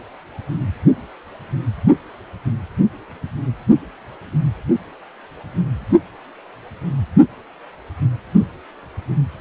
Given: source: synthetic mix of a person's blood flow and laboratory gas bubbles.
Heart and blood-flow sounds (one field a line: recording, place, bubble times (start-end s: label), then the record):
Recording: Doppler ultrasound of blood flow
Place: precordium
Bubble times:
no bubbles
From the record:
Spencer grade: 0 (complete lack of bubble signals)